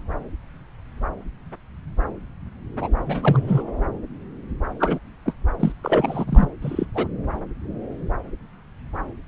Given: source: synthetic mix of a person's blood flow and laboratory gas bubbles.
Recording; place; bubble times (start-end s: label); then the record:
Doppler ultrasound of blood flow; subclavian vein
2.80-2.89 s: bubbles
3.07-3.63 s: bubbles
4.79-4.99 s: bubbles
5.25-5.33 s: bubbles
5.59-5.72 s: bubbles
5.82-6.24 s: bubbles
6.27-6.48 s: bubbles
6.62-6.85 s: bubbles
6.94-7.07 s: bubbles
From the record:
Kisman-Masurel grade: 222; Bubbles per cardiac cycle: several, 3 to 8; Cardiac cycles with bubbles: 10 to 50%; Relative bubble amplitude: moderate (0.250 to 0.450); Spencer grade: 2 (many but less than half of the cardiac periods contain bubble signals, singularly or in groups); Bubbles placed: anywhere in the cardiac cycle